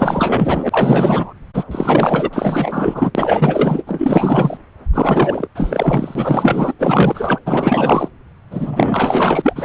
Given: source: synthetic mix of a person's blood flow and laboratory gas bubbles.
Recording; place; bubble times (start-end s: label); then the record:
Doppler ultrasound of blood flow; subclavian vein
0.00-1.33 s: bubbles
1.53-1.64 s: bubbles
1.71-2.30 s: bubbles
2.33-3.12 s: bubbles
3.14-3.83 s: bubbles
3.86-4.58 s: bubbles
4.93-5.47 s: bubbles
5.55-6.73 s: bubbles
6.79-7.39 s: bubbles
7.46-8.09 s: bubbles
8.50-9.65 s: bubbles
From the record:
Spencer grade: 4 (maximum detectable bubble signal sounding continuously throughout systole and diastole of every cardiac period, and overriding the amplitude of the normal cardiac signals); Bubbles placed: anywhere in the cardiac cycle